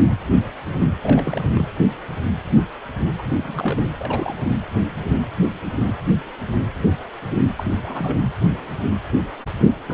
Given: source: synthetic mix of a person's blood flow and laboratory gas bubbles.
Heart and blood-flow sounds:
Doppler ultrasound of blood flow; precordium
1.03-1.65 s: bubbles
3.18-3.23 s: bubbles
3.31-3.81 s: bubbles
3.98-4.36 s: bubbles
4.44-4.52 s: bubbles
7.57-7.64 s: bubbles
7.83-8.18 s: bubbles
9.88-9.93 s: bubbles
From the record:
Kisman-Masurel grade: 221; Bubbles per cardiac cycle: several, 3 to 8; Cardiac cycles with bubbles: 10 to 50%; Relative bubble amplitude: barely perceptible (0.100 to 0.250); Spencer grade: 2 (many but less than half of the cardiac periods contain bubble signals, singularly or in groups); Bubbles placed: anywhere in the cardiac cycle

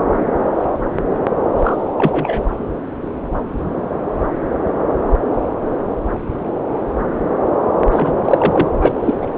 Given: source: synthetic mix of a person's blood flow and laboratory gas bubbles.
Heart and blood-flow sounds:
Doppler ultrasound of blood flow; subclavian vein
1.55-1.95 s: bubbles
1.98-2.50 s: bubbles
7.92-8.13 s: bubbles
8.24-8.68 s: bubbles
8.81-8.92 s: bubbles
9.02-9.18 s: bubbles
9.21-9.27 s: bubbles
From the record:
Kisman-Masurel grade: 223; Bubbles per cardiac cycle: several, 3 to 8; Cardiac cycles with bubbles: 10 to 50%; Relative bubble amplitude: loud (0.450 to 0.775); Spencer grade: 2 (many but less than half of the cardiac periods contain bubble signals, singularly or in groups); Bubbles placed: anywhere in the cardiac cycle

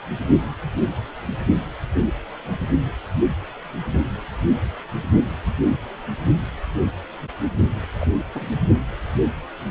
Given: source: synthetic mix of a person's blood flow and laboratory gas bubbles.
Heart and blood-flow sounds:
Doppler ultrasound of blood flow; precordium
8.00-8.06 s: bubbles
8.35-8.46 s: bubbles
From the record:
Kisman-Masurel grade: 112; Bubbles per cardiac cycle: 1 to 2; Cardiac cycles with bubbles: 1 to 10%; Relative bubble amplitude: moderate (0.250 to 0.450); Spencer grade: 1 (occasional bubble signal discernible with the cardiac motion signal, with majority of cardiac periods free of bubbles); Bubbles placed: only in the low amplitude regions of the cardiac cycle

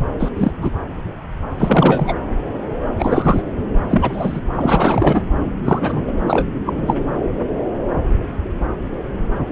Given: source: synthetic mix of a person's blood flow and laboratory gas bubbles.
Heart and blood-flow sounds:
Doppler ultrasound of blood flow; subclavian vein
0.19-0.30 s: bubbles
0.37-0.52 s: bubbles
0.61-0.71 s: bubbles
1.56-2.14 s: bubbles
2.99-3.42 s: bubbles
3.89-4.40 s: bubbles
4.55-5.24 s: bubbles
5.64-6.04 s: bubbles
6.06-6.12 s: bubbles
6.27-6.47 s: bubbles
6.66-6.95 s: bubbles
From the record:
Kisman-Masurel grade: 233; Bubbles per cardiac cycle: several, 3 to 8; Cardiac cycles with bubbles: 50 to 99%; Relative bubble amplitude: loud (0.450 to 0.775); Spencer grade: 3 (all of the cardiac periods contain showers or single bubble signals, but not dominating or overriding the cardiac motion signals); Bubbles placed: anywhere in the cardiac cycle

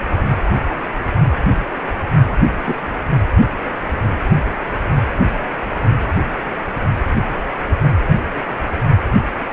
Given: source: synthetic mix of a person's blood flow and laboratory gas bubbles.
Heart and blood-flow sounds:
Doppler ultrasound of blood flow; precordium
2.65-2.77 s: bubbles
From the record:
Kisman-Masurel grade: 112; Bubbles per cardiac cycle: 1 to 2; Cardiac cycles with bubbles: 1 to 10%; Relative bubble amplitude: moderate (0.250 to 0.450); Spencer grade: 1 (occasional bubble signal discernible with the cardiac motion signal, with majority of cardiac periods free of bubbles); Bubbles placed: only in the low amplitude regions of the cardiac cycle

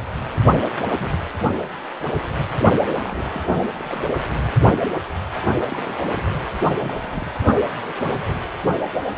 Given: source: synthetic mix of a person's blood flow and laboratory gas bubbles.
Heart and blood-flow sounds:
Doppler ultrasound of blood flow; precordium
0.47-0.61 s: bubbles
0.80-0.91 s: bubbles
0.97-1.18 s: bubbles
1.43-1.55 s: bubbles
2.53-2.69 s: bubbles
2.79-3.29 s: bubbles
3.32-3.49 s: bubbles
3.54-3.58 s: bubbles
3.74-4.11 s: bubbles
5.66-6.00 s: bubbles
6.06-6.29 s: bubbles
6.80-6.96 s: bubbles
7.02-7.30 s: bubbles
7.40-7.46 s: bubbles
7.87-7.91 s: bubbles
From the record:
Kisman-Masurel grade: 221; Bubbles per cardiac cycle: several, 3 to 8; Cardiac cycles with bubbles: 10 to 50%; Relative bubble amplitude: barely perceptible (0.100 to 0.250); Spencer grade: 2 (many but less than half of the cardiac periods contain bubble signals, singularly or in groups); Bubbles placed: anywhere in the cardiac cycle

